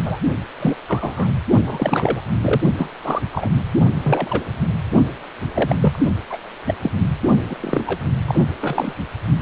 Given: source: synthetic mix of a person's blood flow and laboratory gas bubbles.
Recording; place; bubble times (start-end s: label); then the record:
Doppler ultrasound of blood flow; precordium
0.03-0.18 s: bubbles
0.60-0.76 s: bubbles
0.88-1.31 s: bubbles
1.66-2.21 s: bubbles
2.38-2.61 s: bubbles
2.77-2.90 s: bubbles
3.02-3.21 s: bubbles
3.31-3.53 s: bubbles
4.04-4.43 s: bubbles
5.54-5.75 s: bubbles
5.80-5.99 s: bubbles
6.29-6.38 s: bubbles
6.66-6.75 s: bubbles
6.83-6.91 s: bubbles
7.49-7.55 s: bubbles
7.60-7.84 s: bubbles
7.87-7.99 s: bubbles
8.27-8.40 s: bubbles
8.61-8.93 s: bubbles
From the record:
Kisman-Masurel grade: 242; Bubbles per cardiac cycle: several, 3 to 8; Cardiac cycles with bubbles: 100%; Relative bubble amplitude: moderate (0.250 to 0.450); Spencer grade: 3 (all of the cardiac periods contain showers or single bubble signals, but not dominating or overriding the cardiac motion signals); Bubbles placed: only in the low amplitude regions of the cardiac cycle